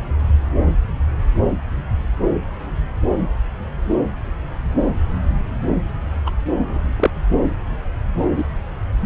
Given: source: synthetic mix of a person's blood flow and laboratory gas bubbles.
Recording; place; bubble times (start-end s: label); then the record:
Doppler ultrasound of blood flow; subclavian vein
6.26-6.31 s: bubbles
6.69-6.78 s: bubbles
6.97-7.10 s: bubbles
8.36-8.45 s: bubbles
From the record:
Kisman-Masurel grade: 123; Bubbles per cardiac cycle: 1 to 2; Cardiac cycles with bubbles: 10 to 50%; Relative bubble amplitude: loud (0.450 to 0.775); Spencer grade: 2 (many but less than half of the cardiac periods contain bubble signals, singularly or in groups); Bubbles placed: anywhere in the cardiac cycle